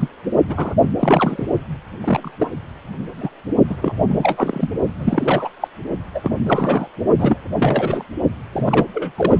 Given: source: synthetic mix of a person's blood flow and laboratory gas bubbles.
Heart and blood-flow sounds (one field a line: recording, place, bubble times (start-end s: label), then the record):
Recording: Doppler ultrasound of blood flow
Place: precordium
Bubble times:
0.00-0.08 s: bubbles
0.48-0.75 s: bubbles
0.98-1.47 s: bubbles
2.00-2.31 s: bubbles
2.38-2.51 s: bubbles
3.17-3.29 s: bubbles
3.67-3.76 s: bubbles
3.81-3.94 s: bubbles
3.98-4.70 s: bubbles
5.00-5.49 s: bubbles
5.61-5.68 s: bubbles
6.14-6.21 s: bubbles
6.23-6.38 s: bubbles
6.43-6.88 s: bubbles
7.19-7.38 s: bubbles
7.55-8.04 s: bubbles
8.52-8.86 s: bubbles
8.94-9.12 s: bubbles
9.18-9.40 s: bubbles
From the record:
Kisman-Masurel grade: 243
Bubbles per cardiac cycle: several, 3 to 8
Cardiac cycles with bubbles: 100%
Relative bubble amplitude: loud (0.450 to 0.775)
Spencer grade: 3 (all of the cardiac periods contain showers or single bubble signals, but not dominating or overriding the cardiac motion signals)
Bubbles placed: only in the low amplitude regions of the cardiac cycle